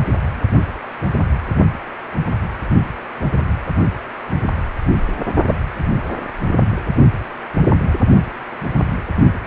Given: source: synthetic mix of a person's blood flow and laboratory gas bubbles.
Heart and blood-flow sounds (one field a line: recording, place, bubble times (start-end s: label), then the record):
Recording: Doppler ultrasound of blood flow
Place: precordium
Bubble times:
5.47-5.54 s: bubbles
From the record:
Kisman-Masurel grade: 113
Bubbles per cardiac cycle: 1 to 2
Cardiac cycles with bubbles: 1 to 10%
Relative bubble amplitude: loud (0.450 to 0.775)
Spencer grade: 1 (occasional bubble signal discernible with the cardiac motion signal, with majority of cardiac periods free of bubbles)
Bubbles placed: only in the low amplitude regions of the cardiac cycle